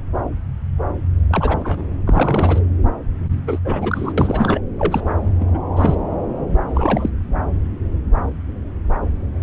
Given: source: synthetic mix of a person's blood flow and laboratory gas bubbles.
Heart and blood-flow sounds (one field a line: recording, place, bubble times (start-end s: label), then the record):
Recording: Doppler ultrasound of blood flow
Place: subclavian vein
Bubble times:
1.30-1.83 s: bubbles
2.06-2.59 s: bubbles
3.47-3.58 s: bubbles
3.65-4.13 s: bubbles
4.17-4.61 s: bubbles
4.79-5.00 s: bubbles
5.40-5.45 s: bubbles
5.54-5.59 s: bubbles
5.76-5.95 s: bubbles
6.70-7.10 s: bubbles
From the record:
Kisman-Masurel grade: 222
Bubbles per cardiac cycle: several, 3 to 8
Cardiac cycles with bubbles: 10 to 50%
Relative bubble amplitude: moderate (0.250 to 0.450)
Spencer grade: 2 (many but less than half of the cardiac periods contain bubble signals, singularly or in groups)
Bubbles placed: anywhere in the cardiac cycle